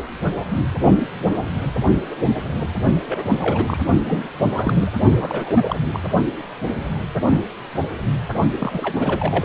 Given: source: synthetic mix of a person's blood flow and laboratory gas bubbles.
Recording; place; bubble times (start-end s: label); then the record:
Doppler ultrasound of blood flow; precordium
3.06-3.23 s: bubbles
3.31-3.80 s: bubbles
4.05-4.29 s: bubbles
4.42-4.92 s: bubbles
5.18-5.76 s: bubbles
5.92-6.00 s: bubbles
8.59-9.44 s: bubbles
From the record:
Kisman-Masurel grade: 332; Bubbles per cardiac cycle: rolling drumbeat, 9 or more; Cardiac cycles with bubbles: 50 to 99%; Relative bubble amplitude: moderate (0.250 to 0.450); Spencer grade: 3 (all of the cardiac periods contain showers or single bubble signals, but not dominating or overriding the cardiac motion signals); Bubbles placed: only in the low amplitude regions of the cardiac cycle